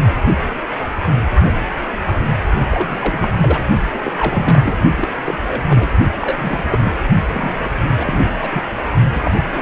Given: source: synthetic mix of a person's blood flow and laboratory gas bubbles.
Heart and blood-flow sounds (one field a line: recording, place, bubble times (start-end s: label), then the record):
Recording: Doppler ultrasound of blood flow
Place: precordium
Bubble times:
2.71-3.62 s: bubbles
3.92-4.12 s: bubbles
4.18-4.76 s: bubbles
4.96-5.10 s: bubbles
5.13-5.38 s: bubbles
5.48-5.65 s: bubbles
5.69-5.89 s: bubbles
6.22-6.64 s: bubbles
6.70-6.93 s: bubbles
7.33-7.60 s: bubbles
7.65-7.69 s: bubbles
7.95-8.25 s: bubbles
8.41-8.62 s: bubbles
9.12-9.62 s: bubbles
From the record:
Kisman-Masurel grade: 332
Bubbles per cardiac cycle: rolling drumbeat, 9 or more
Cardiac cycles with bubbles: 50 to 99%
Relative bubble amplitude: moderate (0.250 to 0.450)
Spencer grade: 3 (all of the cardiac periods contain showers or single bubble signals, but not dominating or overriding the cardiac motion signals)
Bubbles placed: only in the low amplitude regions of the cardiac cycle